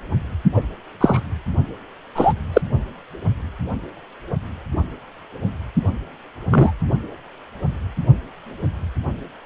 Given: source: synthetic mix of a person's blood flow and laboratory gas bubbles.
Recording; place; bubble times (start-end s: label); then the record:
Doppler ultrasound of blood flow; precordium
0.54-0.61 s: bubbles
1.00-1.20 s: bubbles
2.15-2.33 s: bubbles
2.53-2.62 s: bubbles
6.50-6.73 s: bubbles
From the record:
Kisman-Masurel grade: 123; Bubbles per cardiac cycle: 1 to 2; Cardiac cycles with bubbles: 10 to 50%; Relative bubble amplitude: loud (0.450 to 0.775); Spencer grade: 2 (many but less than half of the cardiac periods contain bubble signals, singularly or in groups); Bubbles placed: only in the low amplitude regions of the cardiac cycle